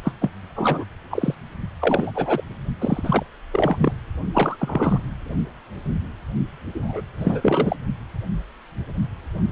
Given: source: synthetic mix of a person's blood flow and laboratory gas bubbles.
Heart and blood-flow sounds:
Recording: Doppler ultrasound of blood flow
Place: precordium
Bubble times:
0.04-0.12 s: bubbles
0.21-0.30 s: bubbles
0.56-0.85 s: bubbles
1.10-1.34 s: bubbles
1.80-2.11 s: bubbles
2.15-2.42 s: bubbles
2.81-3.23 s: bubbles
3.51-3.92 s: bubbles
4.33-4.57 s: bubbles
4.60-5.00 s: bubbles
6.74-7.01 s: bubbles
7.20-7.76 s: bubbles
From the record:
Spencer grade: 3 (all of the cardiac periods contain showers or single bubble signals, but not dominating or overriding the cardiac motion signals)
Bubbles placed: only in the low amplitude regions of the cardiac cycle

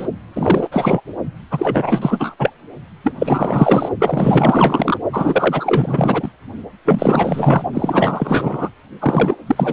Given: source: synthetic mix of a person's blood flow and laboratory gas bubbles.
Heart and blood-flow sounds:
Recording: Doppler ultrasound of blood flow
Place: precordium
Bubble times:
0.00-0.07 s: bubbles
0.33-0.68 s: bubbles
0.71-1.00 s: bubbles
1.50-2.35 s: bubbles
2.39-2.50 s: bubbles
3.04-3.15 s: bubbles
3.19-3.89 s: bubbles
3.99-4.97 s: bubbles
5.12-6.30 s: bubbles
6.85-7.63 s: bubbles
7.73-8.70 s: bubbles
8.99-9.37 s: bubbles
9.46-9.73 s: bubbles
From the record:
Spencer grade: 4 (maximum detectable bubble signal sounding continuously throughout systole and diastole of every cardiac period, and overriding the amplitude of the normal cardiac signals)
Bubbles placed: only in the low amplitude regions of the cardiac cycle

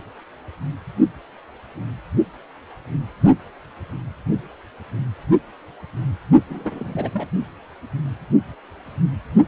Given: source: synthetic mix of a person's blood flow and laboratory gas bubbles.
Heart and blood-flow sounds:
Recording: Doppler ultrasound of blood flow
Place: precordium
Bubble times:
6.49-7.29 s: bubbles
From the record:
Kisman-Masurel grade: 221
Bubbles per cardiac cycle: several, 3 to 8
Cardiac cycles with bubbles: 10 to 50%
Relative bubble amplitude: barely perceptible (0.100 to 0.250)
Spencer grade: 2 (many but less than half of the cardiac periods contain bubble signals, singularly or in groups)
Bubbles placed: only in the low amplitude regions of the cardiac cycle

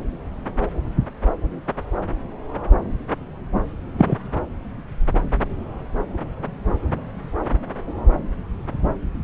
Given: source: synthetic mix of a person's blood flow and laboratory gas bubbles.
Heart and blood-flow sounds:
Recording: Doppler ultrasound of blood flow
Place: subclavian vein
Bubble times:
3.98-4.16 s: bubbles
From the record:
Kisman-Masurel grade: 113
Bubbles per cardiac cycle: 1 to 2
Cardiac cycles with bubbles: 1 to 10%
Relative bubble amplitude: loud (0.450 to 0.775)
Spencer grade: 1 (occasional bubble signal discernible with the cardiac motion signal, with majority of cardiac periods free of bubbles)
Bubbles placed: anywhere in the cardiac cycle

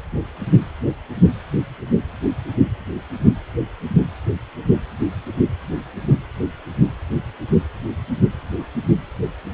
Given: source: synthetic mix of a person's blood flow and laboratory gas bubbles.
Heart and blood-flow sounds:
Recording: Doppler ultrasound of blood flow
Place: precordium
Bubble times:
no bubbles
From the record:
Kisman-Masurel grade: 000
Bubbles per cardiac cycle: 0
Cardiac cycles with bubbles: 0%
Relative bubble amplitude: no bubbles discernible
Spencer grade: 0 (complete lack of bubble signals)

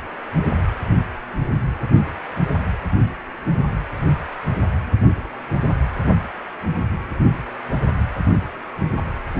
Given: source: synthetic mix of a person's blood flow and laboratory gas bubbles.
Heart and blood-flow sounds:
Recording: Doppler ultrasound of blood flow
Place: precordium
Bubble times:
no bubbles
From the record:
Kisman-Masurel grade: 000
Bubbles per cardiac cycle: 0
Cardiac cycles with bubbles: 0%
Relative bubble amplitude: no bubbles discernible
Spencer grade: 0 (complete lack of bubble signals)

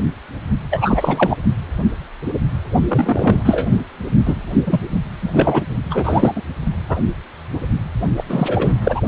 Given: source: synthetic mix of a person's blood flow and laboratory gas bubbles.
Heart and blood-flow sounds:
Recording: Doppler ultrasound of blood flow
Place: precordium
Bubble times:
0.70-1.37 s: bubbles
2.88-3.77 s: bubbles
4.25-4.43 s: bubbles
4.66-4.85 s: bubbles
5.22-5.63 s: bubbles
5.90-6.42 s: bubbles
6.88-6.98 s: bubbles
8.17-8.24 s: bubbles
8.29-8.77 s: bubbles
8.85-9.01 s: bubbles
From the record:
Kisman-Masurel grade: 333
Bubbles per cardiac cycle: rolling drumbeat, 9 or more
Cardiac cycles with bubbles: 50 to 99%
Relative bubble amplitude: loud (0.450 to 0.775)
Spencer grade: 3 (all of the cardiac periods contain showers or single bubble signals, but not dominating or overriding the cardiac motion signals)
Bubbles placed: only in the low amplitude regions of the cardiac cycle

